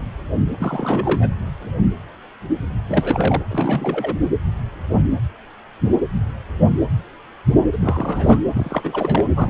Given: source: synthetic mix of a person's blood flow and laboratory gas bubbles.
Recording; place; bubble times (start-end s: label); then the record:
Doppler ultrasound of blood flow; precordium
0.58-1.30 s: bubbles
2.88-3.42 s: bubbles
3.48-4.16 s: bubbles
7.72-8.41 s: bubbles
8.54-9.24 s: bubbles
9.34-9.50 s: bubbles
From the record:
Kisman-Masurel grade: 332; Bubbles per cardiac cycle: rolling drumbeat, 9 or more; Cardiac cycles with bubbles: 50 to 99%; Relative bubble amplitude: moderate (0.250 to 0.450); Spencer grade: 3 (all of the cardiac periods contain showers or single bubble signals, but not dominating or overriding the cardiac motion signals); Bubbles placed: anywhere in the cardiac cycle